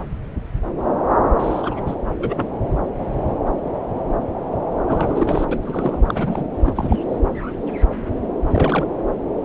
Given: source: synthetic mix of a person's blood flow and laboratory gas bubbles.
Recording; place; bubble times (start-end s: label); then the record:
Doppler ultrasound of blood flow; subclavian vein
1.38-1.80 s: bubbles
1.86-1.95 s: bubbles
2.18-2.54 s: bubbles
4.88-5.45 s: bubbles
5.51-5.58 s: bubbles
5.62-6.00 s: bubbles
6.06-6.45 s: bubbles
6.62-6.99 s: bubbles
8.42-8.87 s: bubbles
From the record:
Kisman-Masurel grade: 222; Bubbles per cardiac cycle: several, 3 to 8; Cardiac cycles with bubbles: 10 to 50%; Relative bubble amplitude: moderate (0.250 to 0.450); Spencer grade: 2 (many but less than half of the cardiac periods contain bubble signals, singularly or in groups); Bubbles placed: anywhere in the cardiac cycle